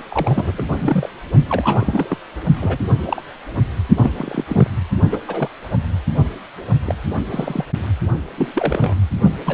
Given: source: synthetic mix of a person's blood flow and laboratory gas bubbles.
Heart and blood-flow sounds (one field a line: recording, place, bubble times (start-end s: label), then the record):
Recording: Doppler ultrasound of blood flow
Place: precordium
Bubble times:
0.09-0.64 s: bubbles
0.78-1.09 s: bubbles
1.48-2.17 s: bubbles
2.56-2.77 s: bubbles
3.05-3.22 s: bubbles
3.96-4.10 s: bubbles
4.17-4.44 s: bubbles
4.48-4.67 s: bubbles
5.11-5.19 s: bubbles
5.27-5.49 s: bubbles
6.85-6.94 s: bubbles
7.29-7.65 s: bubbles
8.38-8.95 s: bubbles
9.45-9.54 s: bubbles
From the record:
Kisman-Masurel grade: 242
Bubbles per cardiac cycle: several, 3 to 8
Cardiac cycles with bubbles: 100%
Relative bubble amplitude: moderate (0.250 to 0.450)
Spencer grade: 3 (all of the cardiac periods contain showers or single bubble signals, but not dominating or overriding the cardiac motion signals)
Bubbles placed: only in the low amplitude regions of the cardiac cycle